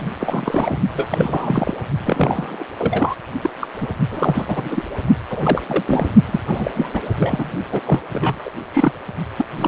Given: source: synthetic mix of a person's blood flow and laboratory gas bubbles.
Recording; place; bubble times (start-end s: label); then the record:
Doppler ultrasound of blood flow; precordium
0.00-0.09 s: bubbles
0.20-0.78 s: bubbles
0.95-1.74 s: bubbles
2.05-2.66 s: bubbles
2.79-3.15 s: bubbles
3.43-3.50 s: bubbles
3.60-3.67 s: bubbles
3.80-3.88 s: bubbles
4.11-4.84 s: bubbles
5.30-5.61 s: bubbles
5.68-5.83 s: bubbles
5.87-6.10 s: bubbles
6.25-6.40 s: bubbles
6.47-6.71 s: bubbles
6.74-6.88 s: bubbles
6.93-7.01 s: bubbles
7.18-7.51 s: bubbles
7.71-7.80 s: bubbles
7.85-8.01 s: bubbles
8.12-8.49 s: bubbles
8.72-8.93 s: bubbles
9.38-9.45 s: bubbles
9.57-9.67 s: bubbles
From the record:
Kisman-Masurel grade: 342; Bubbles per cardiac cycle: rolling drumbeat, 9 or more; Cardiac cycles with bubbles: 100%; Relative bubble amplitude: moderate (0.250 to 0.450); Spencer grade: 3 (all of the cardiac periods contain showers or single bubble signals, but not dominating or overriding the cardiac motion signals); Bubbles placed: only in the low amplitude regions of the cardiac cycle